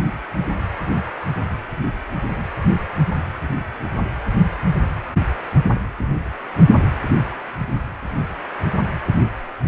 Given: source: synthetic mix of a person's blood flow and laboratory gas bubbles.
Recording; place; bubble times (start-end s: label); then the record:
Doppler ultrasound of blood flow; precordium
no bubbles
From the record:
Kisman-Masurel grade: 000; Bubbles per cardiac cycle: 0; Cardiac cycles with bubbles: 0%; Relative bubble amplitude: no bubbles discernible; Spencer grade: 0 (complete lack of bubble signals)